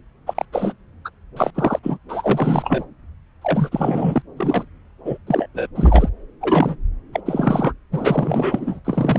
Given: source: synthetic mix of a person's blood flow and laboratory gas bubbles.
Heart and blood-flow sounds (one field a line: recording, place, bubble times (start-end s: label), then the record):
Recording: Doppler ultrasound of blood flow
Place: subclavian vein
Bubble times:
0.26-0.45 s: bubbles
0.52-0.73 s: bubbles
1.05-1.09 s: bubbles
1.36-1.51 s: bubbles
1.55-1.79 s: bubbles
1.83-1.98 s: bubbles
2.08-2.84 s: bubbles
3.42-4.22 s: bubbles
4.37-4.65 s: bubbles
5.05-5.18 s: bubbles
5.27-5.47 s: bubbles
5.54-5.68 s: bubbles
5.75-6.09 s: bubbles
6.41-6.76 s: bubbles
7.13-7.21 s: bubbles
7.25-7.73 s: bubbles
7.92-8.79 s: bubbles
8.85-9.19 s: bubbles
From the record:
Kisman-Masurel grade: 342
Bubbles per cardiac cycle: rolling drumbeat, 9 or more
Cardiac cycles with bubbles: 100%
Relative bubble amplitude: moderate (0.250 to 0.450)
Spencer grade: 3 (all of the cardiac periods contain showers or single bubble signals, but not dominating or overriding the cardiac motion signals)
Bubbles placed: anywhere in the cardiac cycle